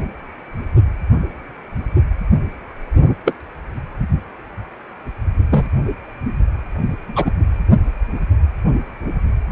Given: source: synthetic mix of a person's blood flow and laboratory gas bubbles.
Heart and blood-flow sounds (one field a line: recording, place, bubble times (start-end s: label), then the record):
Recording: Doppler ultrasound of blood flow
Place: precordium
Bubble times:
3.25-3.33 s: bubbles
5.50-5.67 s: bubbles
7.16-7.31 s: bubbles
From the record:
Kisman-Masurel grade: 123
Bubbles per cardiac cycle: 1 to 2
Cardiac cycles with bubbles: 10 to 50%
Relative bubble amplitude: loud (0.450 to 0.775)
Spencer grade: 2 (many but less than half of the cardiac periods contain bubble signals, singularly or in groups)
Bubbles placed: anywhere in the cardiac cycle